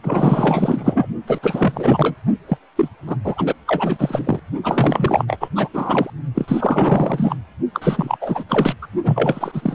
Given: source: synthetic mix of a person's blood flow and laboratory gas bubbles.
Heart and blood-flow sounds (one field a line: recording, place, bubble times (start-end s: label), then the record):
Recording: Doppler ultrasound of blood flow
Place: precordium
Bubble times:
0.02-1.07 s: bubbles
1.27-1.40 s: bubbles
1.42-2.15 s: bubbles
2.48-2.57 s: bubbles
2.76-2.89 s: bubbles
3.06-3.17 s: bubbles
3.24-3.55 s: bubbles
3.67-4.39 s: bubbles
4.63-5.38 s: bubbles
5.40-5.49 s: bubbles
5.55-5.68 s: bubbles
5.73-6.10 s: bubbles
6.34-7.36 s: bubbles
7.73-8.17 s: bubbles
8.21-8.44 s: bubbles
8.48-8.74 s: bubbles
8.81-8.87 s: bubbles
9.03-9.75 s: bubbles
From the record:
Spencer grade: 4 (maximum detectable bubble signal sounding continuously throughout systole and diastole of every cardiac period, and overriding the amplitude of the normal cardiac signals)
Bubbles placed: only in the low amplitude regions of the cardiac cycle